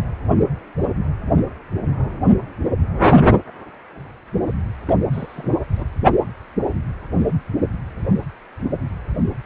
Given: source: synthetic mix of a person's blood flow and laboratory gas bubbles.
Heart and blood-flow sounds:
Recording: Doppler ultrasound of blood flow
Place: precordium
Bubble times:
4.87-4.92 s: bubbles
5.12-5.57 s: bubbles
5.77-5.85 s: bubbles
From the record:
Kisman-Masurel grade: 211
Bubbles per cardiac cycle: several, 3 to 8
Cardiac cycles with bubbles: 1 to 10%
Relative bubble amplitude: barely perceptible (0.100 to 0.250)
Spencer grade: 1 (occasional bubble signal discernible with the cardiac motion signal, with majority of cardiac periods free of bubbles)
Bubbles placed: anywhere in the cardiac cycle

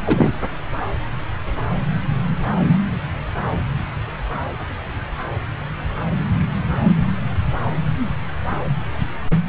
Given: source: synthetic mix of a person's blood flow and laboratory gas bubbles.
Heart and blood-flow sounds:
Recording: Doppler ultrasound of blood flow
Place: subclavian vein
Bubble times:
0.06-0.31 s: bubbles
From the record:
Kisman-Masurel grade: 213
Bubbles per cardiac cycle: several, 3 to 8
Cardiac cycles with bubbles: 1 to 10%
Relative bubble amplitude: loud (0.450 to 0.775)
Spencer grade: 1 (occasional bubble signal discernible with the cardiac motion signal, with majority of cardiac periods free of bubbles)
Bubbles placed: anywhere in the cardiac cycle

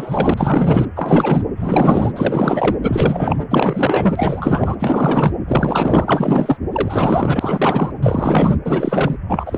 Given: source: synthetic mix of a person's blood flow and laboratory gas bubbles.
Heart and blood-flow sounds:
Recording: Doppler ultrasound of blood flow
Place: precordium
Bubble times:
0.00-0.34 s: bubbles
0.36-0.86 s: bubbles
0.95-1.43 s: bubbles
1.57-2.12 s: bubbles
2.16-2.76 s: bubbles
2.82-3.47 s: bubbles
3.50-4.76 s: bubbles
4.79-5.33 s: bubbles
5.47-6.57 s: bubbles
6.72-7.92 s: bubbles
8.03-8.56 s: bubbles
8.66-9.17 s: bubbles
9.28-9.57 s: bubbles
From the record:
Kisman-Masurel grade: 444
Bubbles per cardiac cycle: continuous sound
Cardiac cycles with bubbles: 100%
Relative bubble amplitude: maximal (0.775 to 0.999)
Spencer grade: 4 (maximum detectable bubble signal sounding continuously throughout systole and diastole of every cardiac period, and overriding the amplitude of the normal cardiac signals)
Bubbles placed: anywhere in the cardiac cycle

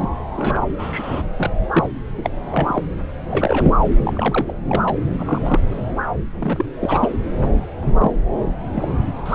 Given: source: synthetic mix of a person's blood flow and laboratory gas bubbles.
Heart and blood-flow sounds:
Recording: Doppler ultrasound of blood flow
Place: subclavian vein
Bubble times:
0.00-0.08 s: bubbles
0.37-1.23 s: bubbles
1.36-1.50 s: bubbles
1.73-1.90 s: bubbles
2.17-2.29 s: bubbles
2.50-2.82 s: bubbles
3.30-3.73 s: bubbles
4.04-4.54 s: bubbles
4.66-4.95 s: bubbles
5.19-5.60 s: bubbles
5.67-5.86 s: bubbles
6.39-6.66 s: bubbles
6.80-7.10 s: bubbles
7.39-7.50 s: bubbles
7.83-8.12 s: bubbles
8.74-8.88 s: bubbles
9.25-9.35 s: bubbles
From the record:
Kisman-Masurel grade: 242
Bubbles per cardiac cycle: several, 3 to 8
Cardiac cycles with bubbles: 100%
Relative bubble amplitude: moderate (0.250 to 0.450)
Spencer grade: 3 (all of the cardiac periods contain showers or single bubble signals, but not dominating or overriding the cardiac motion signals)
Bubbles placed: anywhere in the cardiac cycle

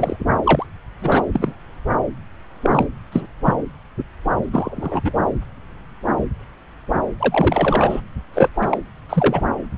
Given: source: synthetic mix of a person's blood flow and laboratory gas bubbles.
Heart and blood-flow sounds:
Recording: Doppler ultrasound of blood flow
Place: subclavian vein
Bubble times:
0.00-0.16 s: bubbles
0.43-0.66 s: bubbles
1.00-1.23 s: bubbles
1.32-1.54 s: bubbles
2.61-2.86 s: bubbles
3.12-3.26 s: bubbles
3.44-3.55 s: bubbles
4.53-5.01 s: bubbles
5.04-5.12 s: bubbles
7.20-8.02 s: bubbles
8.33-8.49 s: bubbles
8.54-8.78 s: bubbles
9.09-9.43 s: bubbles
From the record:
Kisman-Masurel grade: 233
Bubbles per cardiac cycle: several, 3 to 8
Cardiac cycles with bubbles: 50 to 99%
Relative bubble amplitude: loud (0.450 to 0.775)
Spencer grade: 3 (all of the cardiac periods contain showers or single bubble signals, but not dominating or overriding the cardiac motion signals)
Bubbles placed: anywhere in the cardiac cycle

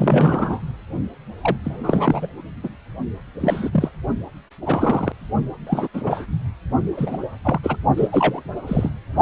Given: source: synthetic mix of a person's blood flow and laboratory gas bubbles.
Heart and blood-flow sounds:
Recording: Doppler ultrasound of blood flow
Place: precordium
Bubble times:
0.00-0.60 s: bubbles
1.42-1.56 s: bubbles
1.65-2.27 s: bubbles
2.63-2.69 s: bubbles
3.40-3.69 s: bubbles
3.73-3.90 s: bubbles
4.61-5.12 s: bubbles
5.67-5.88 s: bubbles
5.93-6.26 s: bubbles
6.97-7.17 s: bubbles
7.44-7.58 s: bubbles
7.63-7.76 s: bubbles
7.96-8.09 s: bubbles
8.12-8.41 s: bubbles
8.67-8.91 s: bubbles
From the record:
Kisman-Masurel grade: 242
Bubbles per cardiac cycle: several, 3 to 8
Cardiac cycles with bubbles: 100%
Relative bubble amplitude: moderate (0.250 to 0.450)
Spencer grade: 3 (all of the cardiac periods contain showers or single bubble signals, but not dominating or overriding the cardiac motion signals)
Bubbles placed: only in the low amplitude regions of the cardiac cycle

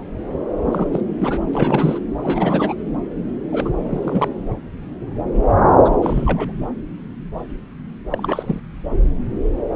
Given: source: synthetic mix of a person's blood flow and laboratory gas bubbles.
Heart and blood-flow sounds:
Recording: Doppler ultrasound of blood flow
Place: subclavian vein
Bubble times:
0.72-0.87 s: bubbles
0.92-1.01 s: bubbles
1.18-1.43 s: bubbles
1.54-1.98 s: bubbles
2.23-2.75 s: bubbles
3.52-3.70 s: bubbles
3.89-4.28 s: bubbles
5.84-5.98 s: bubbles
6.01-6.52 s: bubbles
8.11-8.60 s: bubbles
From the record:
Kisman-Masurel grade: 222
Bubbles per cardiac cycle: several, 3 to 8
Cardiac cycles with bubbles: 10 to 50%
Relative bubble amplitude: moderate (0.250 to 0.450)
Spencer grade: 2 (many but less than half of the cardiac periods contain bubble signals, singularly or in groups)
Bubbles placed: anywhere in the cardiac cycle

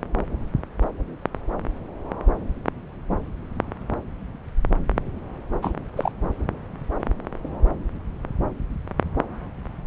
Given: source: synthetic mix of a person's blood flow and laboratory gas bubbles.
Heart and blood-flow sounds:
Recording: Doppler ultrasound of blood flow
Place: subclavian vein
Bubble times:
5.62-5.74 s: bubbles
5.96-6.12 s: bubbles
From the record:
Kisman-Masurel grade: 212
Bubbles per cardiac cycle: several, 3 to 8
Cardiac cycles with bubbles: 1 to 10%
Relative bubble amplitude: moderate (0.250 to 0.450)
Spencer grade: 1 (occasional bubble signal discernible with the cardiac motion signal, with majority of cardiac periods free of bubbles)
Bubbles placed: anywhere in the cardiac cycle

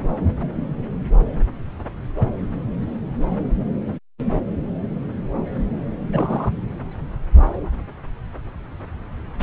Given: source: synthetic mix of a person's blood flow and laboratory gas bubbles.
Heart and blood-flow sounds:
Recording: Doppler ultrasound of blood flow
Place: subclavian vein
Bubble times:
6.12-6.50 s: bubbles
From the record:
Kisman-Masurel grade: 112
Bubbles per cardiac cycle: 1 to 2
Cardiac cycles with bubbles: 1 to 10%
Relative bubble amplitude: moderate (0.250 to 0.450)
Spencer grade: 1 (occasional bubble signal discernible with the cardiac motion signal, with majority of cardiac periods free of bubbles)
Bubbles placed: anywhere in the cardiac cycle

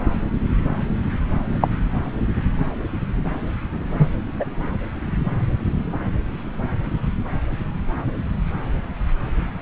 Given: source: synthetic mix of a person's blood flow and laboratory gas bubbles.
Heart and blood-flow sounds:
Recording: Doppler ultrasound of blood flow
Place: subclavian vein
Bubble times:
1.61-1.68 s: bubbles
3.98-4.07 s: bubbles
4.39-4.45 s: bubbles
From the record:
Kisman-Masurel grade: 113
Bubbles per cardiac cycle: 1 to 2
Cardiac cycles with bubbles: 1 to 10%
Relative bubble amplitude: loud (0.450 to 0.775)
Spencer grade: 1 (occasional bubble signal discernible with the cardiac motion signal, with majority of cardiac periods free of bubbles)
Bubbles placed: anywhere in the cardiac cycle

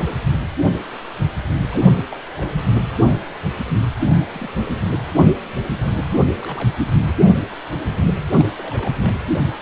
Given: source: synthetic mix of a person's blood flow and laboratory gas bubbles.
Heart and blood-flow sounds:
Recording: Doppler ultrasound of blood flow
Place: precordium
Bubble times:
0.06-0.13 s: bubbles
1.70-1.95 s: bubbles
2.07-2.15 s: bubbles
2.36-2.50 s: bubbles
4.20-4.25 s: bubbles
4.32-4.49 s: bubbles
4.56-4.64 s: bubbles
6.38-6.72 s: bubbles
6.76-6.98 s: bubbles
8.39-8.45 s: bubbles
8.56-9.14 s: bubbles
From the record:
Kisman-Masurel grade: 221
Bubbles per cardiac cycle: several, 3 to 8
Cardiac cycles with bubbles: 10 to 50%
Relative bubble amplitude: barely perceptible (0.100 to 0.250)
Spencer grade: 2 (many but less than half of the cardiac periods contain bubble signals, singularly or in groups)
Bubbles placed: anywhere in the cardiac cycle

